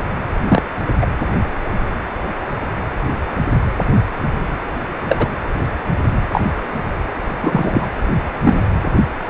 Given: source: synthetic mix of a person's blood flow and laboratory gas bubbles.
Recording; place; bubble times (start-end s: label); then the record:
Doppler ultrasound of blood flow; precordium
0.48-0.62 s: bubbles
1.01-1.07 s: bubbles
5.08-5.27 s: bubbles
6.32-6.41 s: bubbles
7.41-7.88 s: bubbles
8.43-8.62 s: bubbles
From the record:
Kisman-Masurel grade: 123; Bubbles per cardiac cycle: 1 to 2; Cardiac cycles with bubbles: 10 to 50%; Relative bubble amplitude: loud (0.450 to 0.775); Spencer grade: 2 (many but less than half of the cardiac periods contain bubble signals, singularly or in groups); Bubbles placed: anywhere in the cardiac cycle